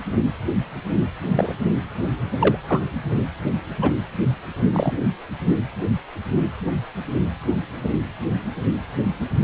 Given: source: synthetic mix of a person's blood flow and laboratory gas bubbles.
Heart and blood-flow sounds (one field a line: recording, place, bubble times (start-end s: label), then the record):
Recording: Doppler ultrasound of blood flow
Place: precordium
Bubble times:
1.35-1.55 s: bubbles
2.40-2.57 s: bubbles
2.68-2.80 s: bubbles
3.81-3.93 s: bubbles
4.73-5.00 s: bubbles
From the record:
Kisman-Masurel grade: 122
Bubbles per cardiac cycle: 1 to 2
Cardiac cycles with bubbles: 10 to 50%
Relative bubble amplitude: moderate (0.250 to 0.450)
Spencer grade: 2 (many but less than half of the cardiac periods contain bubble signals, singularly or in groups)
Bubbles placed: only in the low amplitude regions of the cardiac cycle